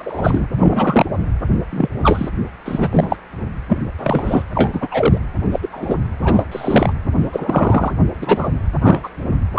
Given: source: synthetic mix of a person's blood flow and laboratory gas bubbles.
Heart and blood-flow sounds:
Doppler ultrasound of blood flow; precordium
0.00-0.47 s: bubbles
0.58-1.05 s: bubbles
1.71-1.88 s: bubbles
2.03-2.29 s: bubbles
2.65-3.17 s: bubbles
3.68-3.78 s: bubbles
3.98-4.43 s: bubbles
4.54-4.88 s: bubbles
4.91-5.18 s: bubbles
5.51-5.60 s: bubbles
5.62-5.69 s: bubbles
5.72-5.96 s: bubbles
6.22-6.44 s: bubbles
6.51-6.93 s: bubbles
7.32-7.91 s: bubbles
8.21-8.48 s: bubbles
8.81-9.10 s: bubbles
9.54-9.59 s: bubbles
From the record:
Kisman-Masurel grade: 243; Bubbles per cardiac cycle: several, 3 to 8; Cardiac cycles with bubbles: 100%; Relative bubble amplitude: loud (0.450 to 0.775); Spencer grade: 3 (all of the cardiac periods contain showers or single bubble signals, but not dominating or overriding the cardiac motion signals); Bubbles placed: anywhere in the cardiac cycle

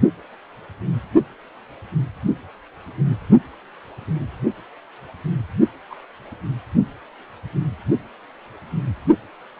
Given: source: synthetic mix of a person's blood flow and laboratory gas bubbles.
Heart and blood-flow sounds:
Doppler ultrasound of blood flow; precordium
5.90-5.95 s: bubbles
From the record:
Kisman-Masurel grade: 111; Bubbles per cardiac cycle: 1 to 2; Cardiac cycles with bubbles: 1 to 10%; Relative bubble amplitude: barely perceptible (0.100 to 0.250); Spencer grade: 1 (occasional bubble signal discernible with the cardiac motion signal, with majority of cardiac periods free of bubbles); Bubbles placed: only in the low amplitude regions of the cardiac cycle

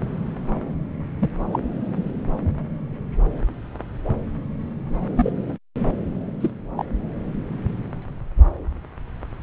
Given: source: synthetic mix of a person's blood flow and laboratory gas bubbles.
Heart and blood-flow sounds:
Doppler ultrasound of blood flow; subclavian vein
1.19-1.30 s: bubbles
1.52-1.59 s: bubbles
5.16-5.30 s: bubbles
6.41-6.51 s: bubbles
6.77-6.86 s: bubbles
From the record:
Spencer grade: 2 (many but less than half of the cardiac periods contain bubble signals, singularly or in groups); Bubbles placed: anywhere in the cardiac cycle

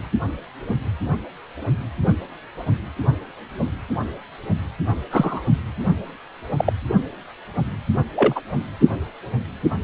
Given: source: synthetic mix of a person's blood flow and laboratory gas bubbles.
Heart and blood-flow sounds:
Doppler ultrasound of blood flow; precordium
5.11-5.41 s: bubbles
6.57-6.73 s: bubbles
8.15-8.41 s: bubbles
From the record:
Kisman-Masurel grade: 123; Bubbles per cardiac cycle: 1 to 2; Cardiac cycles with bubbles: 10 to 50%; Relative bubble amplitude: loud (0.450 to 0.775); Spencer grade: 2 (many but less than half of the cardiac periods contain bubble signals, singularly or in groups); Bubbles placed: anywhere in the cardiac cycle

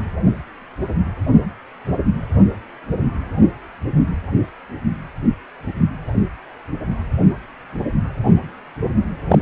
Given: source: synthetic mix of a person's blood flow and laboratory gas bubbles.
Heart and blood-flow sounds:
Doppler ultrasound of blood flow; precordium
9.29-9.39 s: bubbles
From the record:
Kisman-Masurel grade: 113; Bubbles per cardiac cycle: 1 to 2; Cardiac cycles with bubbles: 1 to 10%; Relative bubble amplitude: loud (0.450 to 0.775); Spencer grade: 1 (occasional bubble signal discernible with the cardiac motion signal, with majority of cardiac periods free of bubbles); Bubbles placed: anywhere in the cardiac cycle

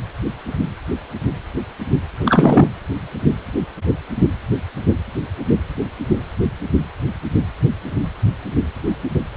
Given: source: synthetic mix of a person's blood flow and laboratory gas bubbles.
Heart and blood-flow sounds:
Doppler ultrasound of blood flow; precordium
2.17-2.67 s: bubbles
From the record:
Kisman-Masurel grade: 213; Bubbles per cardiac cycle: several, 3 to 8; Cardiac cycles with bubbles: 1 to 10%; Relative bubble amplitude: loud (0.450 to 0.775); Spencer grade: 1 (occasional bubble signal discernible with the cardiac motion signal, with majority of cardiac periods free of bubbles); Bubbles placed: anywhere in the cardiac cycle

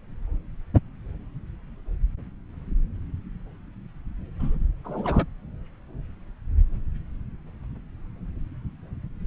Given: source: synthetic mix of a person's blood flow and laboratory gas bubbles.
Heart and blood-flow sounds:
Doppler ultrasound of blood flow; subclavian vein
4.40-4.57 s: bubbles
4.84-5.26 s: bubbles
From the record:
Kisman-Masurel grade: 212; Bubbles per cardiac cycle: several, 3 to 8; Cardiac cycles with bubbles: 1 to 10%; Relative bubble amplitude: moderate (0.250 to 0.450); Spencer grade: 1 (occasional bubble signal discernible with the cardiac motion signal, with majority of cardiac periods free of bubbles); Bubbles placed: anywhere in the cardiac cycle

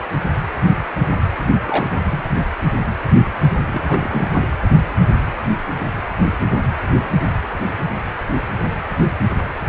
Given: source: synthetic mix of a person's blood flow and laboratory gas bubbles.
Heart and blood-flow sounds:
Doppler ultrasound of blood flow; precordium
1.62-1.87 s: bubbles
2.10-2.24 s: bubbles
3.67-4.44 s: bubbles
From the record:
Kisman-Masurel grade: 222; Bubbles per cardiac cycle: several, 3 to 8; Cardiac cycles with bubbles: 10 to 50%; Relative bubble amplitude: moderate (0.250 to 0.450); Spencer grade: 2 (many but less than half of the cardiac periods contain bubble signals, singularly or in groups); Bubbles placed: anywhere in the cardiac cycle

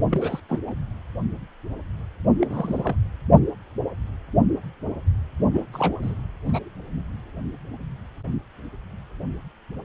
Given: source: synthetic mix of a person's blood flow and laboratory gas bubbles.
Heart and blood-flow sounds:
Doppler ultrasound of blood flow; precordium
0.10-0.40 s: bubbles
0.48-0.58 s: bubbles
0.67-0.73 s: bubbles
2.40-2.96 s: bubbles
5.53-5.64 s: bubbles
5.73-6.15 s: bubbles
6.46-6.70 s: bubbles
From the record:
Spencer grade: 2 (many but less than half of the cardiac periods contain bubble signals, singularly or in groups); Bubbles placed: only in the low amplitude regions of the cardiac cycle

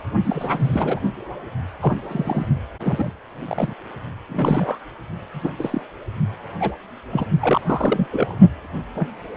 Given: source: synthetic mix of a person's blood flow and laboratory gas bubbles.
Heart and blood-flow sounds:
Doppler ultrasound of blood flow; precordium
0.24-0.99 s: bubbles
1.81-1.96 s: bubbles
2.07-2.47 s: bubbles
2.79-3.11 s: bubbles
3.48-3.73 s: bubbles
4.29-4.80 s: bubbles
5.33-5.51 s: bubbles
5.58-5.82 s: bubbles
6.60-6.76 s: bubbles
7.11-7.28 s: bubbles
7.41-7.62 s: bubbles
7.65-8.07 s: bubbles
8.11-8.38 s: bubbles
8.95-9.10 s: bubbles
From the record:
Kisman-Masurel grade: 232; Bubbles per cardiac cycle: several, 3 to 8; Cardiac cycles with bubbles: 50 to 99%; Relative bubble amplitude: moderate (0.250 to 0.450); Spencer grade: 3 (all of the cardiac periods contain showers or single bubble signals, but not dominating or overriding the cardiac motion signals); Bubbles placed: only in the low amplitude regions of the cardiac cycle

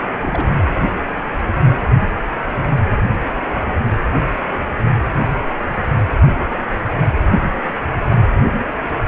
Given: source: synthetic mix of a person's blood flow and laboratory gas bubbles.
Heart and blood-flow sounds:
Doppler ultrasound of blood flow; precordium
0.00-0.03 s: bubbles
0.21-0.59 s: bubbles
From the record:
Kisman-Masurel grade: 221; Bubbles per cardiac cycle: several, 3 to 8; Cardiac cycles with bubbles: 10 to 50%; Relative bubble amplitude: barely perceptible (0.100 to 0.250); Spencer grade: 2 (many but less than half of the cardiac periods contain bubble signals, singularly or in groups); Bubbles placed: anywhere in the cardiac cycle

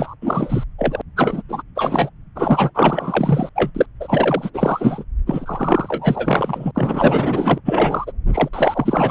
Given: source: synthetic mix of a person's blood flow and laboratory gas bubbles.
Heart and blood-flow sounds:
Doppler ultrasound of blood flow; subclavian vein
0.00-0.15 s: bubbles
0.22-0.64 s: bubbles
0.78-1.02 s: bubbles
1.16-1.43 s: bubbles
1.49-1.62 s: bubbles
1.75-2.10 s: bubbles
2.35-2.71 s: bubbles
2.75-3.49 s: bubbles
3.55-3.71 s: bubbles
3.75-3.86 s: bubbles
4.00-4.50 s: bubbles
4.54-5.04 s: bubbles
5.26-6.71 s: bubbles
6.75-7.61 s: bubbles
7.65-8.12 s: bubbles
8.32-8.49 s: bubbles
8.53-9.11 s: bubbles
From the record:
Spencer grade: 4 (maximum detectable bubble signal sounding continuously throughout systole and diastole of every cardiac period, and overriding the amplitude of the normal cardiac signals); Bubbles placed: anywhere in the cardiac cycle

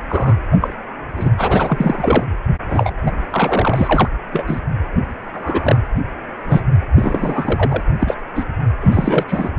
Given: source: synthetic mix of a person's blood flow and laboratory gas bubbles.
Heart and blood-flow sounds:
Doppler ultrasound of blood flow; precordium
0.00-0.02 s: bubbles
0.08-0.36 s: bubbles
0.52-0.57 s: bubbles
0.60-0.74 s: bubbles
1.17-1.30 s: bubbles
1.38-2.27 s: bubbles
2.68-2.94 s: bubbles
3.06-3.11 s: bubbles
3.31-4.09 s: bubbles
4.32-4.61 s: bubbles
5.33-5.80 s: bubbles
6.46-6.76 s: bubbles
6.95-7.83 s: bubbles
7.99-8.15 s: bubbles
8.35-8.45 s: bubbles
8.80-9.23 s: bubbles
9.28-9.50 s: bubbles
From the record:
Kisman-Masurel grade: 243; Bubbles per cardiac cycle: several, 3 to 8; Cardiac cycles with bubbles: 100%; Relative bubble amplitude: loud (0.450 to 0.775); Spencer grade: 3 (all of the cardiac periods contain showers or single bubble signals, but not dominating or overriding the cardiac motion signals); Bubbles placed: anywhere in the cardiac cycle

